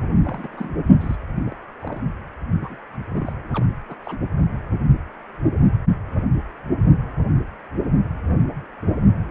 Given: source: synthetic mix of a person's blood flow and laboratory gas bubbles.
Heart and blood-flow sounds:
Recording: Doppler ultrasound of blood flow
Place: precordium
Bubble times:
0.25-0.48 s: bubbles
0.52-0.78 s: bubbles
1.00-1.16 s: bubbles
1.35-1.42 s: bubbles
1.45-1.55 s: bubbles
1.82-2.00 s: bubbles
2.60-2.77 s: bubbles
3.11-3.48 s: bubbles
3.53-3.65 s: bubbles
3.89-3.95 s: bubbles
4.04-4.18 s: bubbles
From the record:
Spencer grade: 2 (many but less than half of the cardiac periods contain bubble signals, singularly or in groups)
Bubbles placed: only in the low amplitude regions of the cardiac cycle

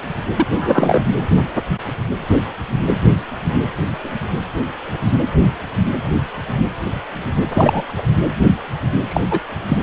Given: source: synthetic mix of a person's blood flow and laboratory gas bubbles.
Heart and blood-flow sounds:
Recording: Doppler ultrasound of blood flow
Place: precordium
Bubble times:
0.37-0.46 s: bubbles
0.51-1.02 s: bubbles
7.50-7.82 s: bubbles
7.89-8.02 s: bubbles
9.09-9.21 s: bubbles
9.30-9.39 s: bubbles
9.68-9.78 s: bubbles
From the record:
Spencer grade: 2 (many but less than half of the cardiac periods contain bubble signals, singularly or in groups)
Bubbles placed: anywhere in the cardiac cycle

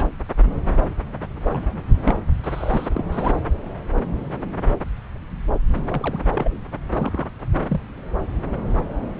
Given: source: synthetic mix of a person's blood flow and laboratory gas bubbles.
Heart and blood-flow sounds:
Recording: Doppler ultrasound of blood flow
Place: subclavian vein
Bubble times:
0.00-0.08 s: bubbles
1.44-1.82 s: bubbles
2.03-2.17 s: bubbles
2.44-2.89 s: bubbles
2.94-3.05 s: bubbles
3.12-3.33 s: bubbles
5.88-6.20 s: bubbles
6.34-6.57 s: bubbles
6.91-7.30 s: bubbles
7.68-7.81 s: bubbles
From the record:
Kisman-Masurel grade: 222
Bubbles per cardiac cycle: several, 3 to 8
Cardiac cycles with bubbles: 10 to 50%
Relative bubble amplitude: moderate (0.250 to 0.450)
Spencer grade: 2 (many but less than half of the cardiac periods contain bubble signals, singularly or in groups)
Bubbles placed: anywhere in the cardiac cycle

